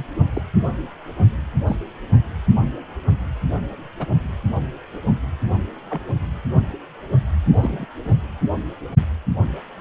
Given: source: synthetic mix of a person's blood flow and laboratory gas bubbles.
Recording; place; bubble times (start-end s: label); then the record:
Doppler ultrasound of blood flow; precordium
0.00-0.03 s: bubbles
0.33-0.41 s: bubbles
1.67-1.76 s: bubbles
3.99-4.06 s: bubbles
5.90-6.00 s: bubbles
7.55-7.86 s: bubbles
8.05-8.17 s: bubbles
9.77-9.81 s: bubbles
From the record:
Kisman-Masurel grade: 122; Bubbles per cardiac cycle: 1 to 2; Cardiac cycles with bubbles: 10 to 50%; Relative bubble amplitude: moderate (0.250 to 0.450); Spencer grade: 2 (many but less than half of the cardiac periods contain bubble signals, singularly or in groups); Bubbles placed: anywhere in the cardiac cycle